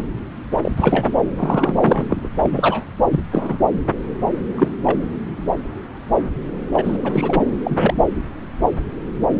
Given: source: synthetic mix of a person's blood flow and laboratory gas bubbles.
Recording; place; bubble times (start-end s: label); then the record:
Doppler ultrasound of blood flow; subclavian vein
0.00-0.02 s: bubbles
0.62-0.71 s: bubbles
0.76-1.13 s: bubbles
1.35-1.75 s: bubbles
1.80-2.04 s: bubbles
2.10-2.17 s: bubbles
2.23-2.28 s: bubbles
2.42-2.84 s: bubbles
3.11-3.20 s: bubbles
3.31-3.58 s: bubbles
4.55-4.68 s: bubbles
4.83-4.98 s: bubbles
6.72-6.96 s: bubbles
7.04-7.46 s: bubbles
7.63-8.09 s: bubbles
From the record:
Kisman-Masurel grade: 233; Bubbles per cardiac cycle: several, 3 to 8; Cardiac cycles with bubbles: 50 to 99%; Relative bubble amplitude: loud (0.450 to 0.775); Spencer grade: 3 (all of the cardiac periods contain showers or single bubble signals, but not dominating or overriding the cardiac motion signals); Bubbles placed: anywhere in the cardiac cycle